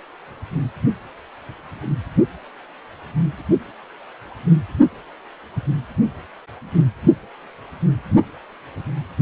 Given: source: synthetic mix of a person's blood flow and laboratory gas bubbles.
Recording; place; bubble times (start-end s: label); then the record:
Doppler ultrasound of blood flow; precordium
no bubbles
From the record:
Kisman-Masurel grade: 000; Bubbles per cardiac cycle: 0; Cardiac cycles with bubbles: 0%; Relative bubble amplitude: no bubbles discernible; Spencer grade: 0 (complete lack of bubble signals)